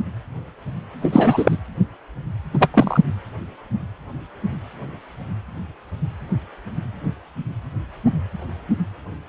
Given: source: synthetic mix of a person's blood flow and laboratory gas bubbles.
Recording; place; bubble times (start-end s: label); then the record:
Doppler ultrasound of blood flow; precordium
1.02-1.57 s: bubbles
2.53-2.69 s: bubbles
2.74-3.00 s: bubbles
From the record:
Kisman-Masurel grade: 223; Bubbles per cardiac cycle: several, 3 to 8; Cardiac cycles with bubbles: 10 to 50%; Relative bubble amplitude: loud (0.450 to 0.775); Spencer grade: 2 (many but less than half of the cardiac periods contain bubble signals, singularly or in groups); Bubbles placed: anywhere in the cardiac cycle